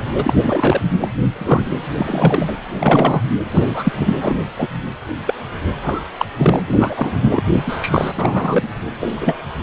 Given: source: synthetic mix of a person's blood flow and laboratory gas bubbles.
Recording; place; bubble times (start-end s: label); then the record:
Doppler ultrasound of blood flow; precordium
0.15-0.34 s: bubbles
0.42-0.81 s: bubbles
1.00-1.08 s: bubbles
1.32-1.75 s: bubbles
1.97-2.54 s: bubbles
2.67-3.21 s: bubbles
3.50-3.92 s: bubbles
3.99-4.38 s: bubbles
4.58-4.68 s: bubbles
5.27-5.34 s: bubbles
5.82-6.00 s: bubbles
6.18-6.25 s: bubbles
6.38-6.61 s: bubbles
6.68-7.42 s: bubbles
7.54-7.62 s: bubbles
7.66-8.12 s: bubbles
8.16-8.70 s: bubbles
9.01-9.42 s: bubbles
From the record:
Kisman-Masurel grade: 243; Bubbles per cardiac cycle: several, 3 to 8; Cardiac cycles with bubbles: 100%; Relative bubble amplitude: loud (0.450 to 0.775); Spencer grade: 3 (all of the cardiac periods contain showers or single bubble signals, but not dominating or overriding the cardiac motion signals); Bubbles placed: anywhere in the cardiac cycle